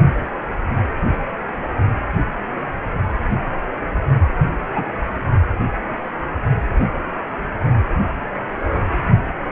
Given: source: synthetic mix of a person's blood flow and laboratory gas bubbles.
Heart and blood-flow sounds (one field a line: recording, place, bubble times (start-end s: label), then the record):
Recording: Doppler ultrasound of blood flow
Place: precordium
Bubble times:
4.75-4.83 s: bubbles
From the record:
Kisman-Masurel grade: 113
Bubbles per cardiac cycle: 1 to 2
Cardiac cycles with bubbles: 1 to 10%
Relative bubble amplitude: loud (0.450 to 0.775)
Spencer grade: 1 (occasional bubble signal discernible with the cardiac motion signal, with majority of cardiac periods free of bubbles)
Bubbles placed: only in the low amplitude regions of the cardiac cycle